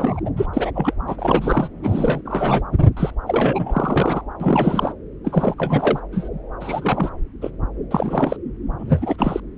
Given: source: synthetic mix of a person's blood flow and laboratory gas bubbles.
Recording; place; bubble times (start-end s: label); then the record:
Doppler ultrasound of blood flow; subclavian vein
0.00-0.20 s: bubbles
0.25-0.30 s: bubbles
0.36-0.46 s: bubbles
0.53-0.71 s: bubbles
0.75-0.93 s: bubbles
1.07-1.69 s: bubbles
1.83-2.21 s: bubbles
2.25-2.62 s: bubbles
2.96-3.10 s: bubbles
3.27-4.21 s: bubbles
4.40-4.92 s: bubbles
5.25-5.54 s: bubbles
5.58-6.00 s: bubbles
6.12-6.29 s: bubbles
6.60-7.09 s: bubbles
7.42-7.50 s: bubbles
7.90-8.37 s: bubbles
8.79-9.40 s: bubbles
From the record:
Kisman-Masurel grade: 332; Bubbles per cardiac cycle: rolling drumbeat, 9 or more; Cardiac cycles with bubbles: 50 to 99%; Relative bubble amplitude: moderate (0.250 to 0.450); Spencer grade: 3 (all of the cardiac periods contain showers or single bubble signals, but not dominating or overriding the cardiac motion signals); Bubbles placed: anywhere in the cardiac cycle